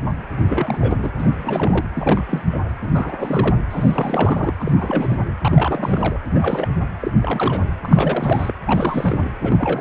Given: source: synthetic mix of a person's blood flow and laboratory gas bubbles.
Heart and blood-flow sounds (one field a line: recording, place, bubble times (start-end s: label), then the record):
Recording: Doppler ultrasound of blood flow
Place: precordium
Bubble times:
0.46-1.10 s: bubbles
1.18-1.87 s: bubbles
1.95-2.24 s: bubbles
2.28-2.43 s: bubbles
2.49-2.60 s: bubbles
2.81-3.59 s: bubbles
3.70-4.54 s: bubbles
4.59-5.17 s: bubbles
5.41-6.19 s: bubbles
6.27-6.67 s: bubbles
6.80-6.87 s: bubbles
7.00-7.11 s: bubbles
7.13-7.67 s: bubbles
7.81-8.53 s: bubbles
8.65-9.29 s: bubbles
9.42-9.81 s: bubbles
From the record:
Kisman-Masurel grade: 342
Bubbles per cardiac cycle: rolling drumbeat, 9 or more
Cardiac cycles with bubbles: 100%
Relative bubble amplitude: moderate (0.250 to 0.450)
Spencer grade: 3 (all of the cardiac periods contain showers or single bubble signals, but not dominating or overriding the cardiac motion signals)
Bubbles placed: anywhere in the cardiac cycle